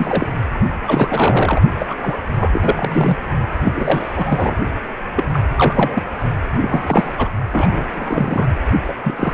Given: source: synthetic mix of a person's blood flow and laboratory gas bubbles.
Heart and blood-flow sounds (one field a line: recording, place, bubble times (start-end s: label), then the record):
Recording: Doppler ultrasound of blood flow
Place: precordium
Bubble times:
0.00-0.27 s: bubbles
0.87-1.62 s: bubbles
1.79-1.96 s: bubbles
2.02-2.17 s: bubbles
2.37-3.17 s: bubbles
3.65-4.55 s: bubbles
5.15-5.24 s: bubbles
5.32-5.40 s: bubbles
5.56-6.03 s: bubbles
6.61-7.29 s: bubbles
7.53-7.85 s: bubbles
7.93-8.47 s: bubbles
8.84-8.93 s: bubbles
9.04-9.34 s: bubbles
From the record:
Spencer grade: 3 (all of the cardiac periods contain showers or single bubble signals, but not dominating or overriding the cardiac motion signals)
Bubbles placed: only in the low amplitude regions of the cardiac cycle